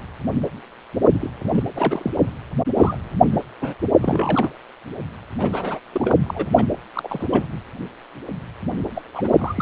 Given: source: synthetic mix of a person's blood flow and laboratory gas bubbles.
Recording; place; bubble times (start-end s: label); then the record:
Doppler ultrasound of blood flow; precordium
1.14-1.19 s: bubbles
1.21-1.30 s: bubbles
1.44-1.49 s: bubbles
1.53-1.63 s: bubbles
1.75-2.11 s: bubbles
2.15-2.33 s: bubbles
2.77-2.96 s: bubbles
3.31-3.44 s: bubbles
3.61-3.75 s: bubbles
4.02-4.50 s: bubbles
5.40-5.79 s: bubbles
5.93-6.13 s: bubbles
6.23-6.46 s: bubbles
6.56-6.65 s: bubbles
6.95-7.28 s: bubbles
7.31-7.46 s: bubbles
8.95-9.02 s: bubbles
9.13-9.62 s: bubbles
From the record:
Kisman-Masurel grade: 232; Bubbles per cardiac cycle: several, 3 to 8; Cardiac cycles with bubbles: 50 to 99%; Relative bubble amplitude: moderate (0.250 to 0.450); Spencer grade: 3 (all of the cardiac periods contain showers or single bubble signals, but not dominating or overriding the cardiac motion signals); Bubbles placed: anywhere in the cardiac cycle